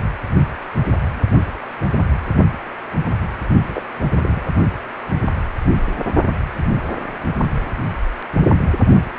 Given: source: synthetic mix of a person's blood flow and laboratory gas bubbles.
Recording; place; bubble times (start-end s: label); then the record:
Doppler ultrasound of blood flow; precordium
3.68-3.83 s: bubbles
4.13-4.46 s: bubbles
From the record:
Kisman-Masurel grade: 211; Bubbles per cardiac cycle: several, 3 to 8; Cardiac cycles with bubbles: 1 to 10%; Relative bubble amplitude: barely perceptible (0.100 to 0.250); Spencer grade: 1 (occasional bubble signal discernible with the cardiac motion signal, with majority of cardiac periods free of bubbles); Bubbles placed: only in the low amplitude regions of the cardiac cycle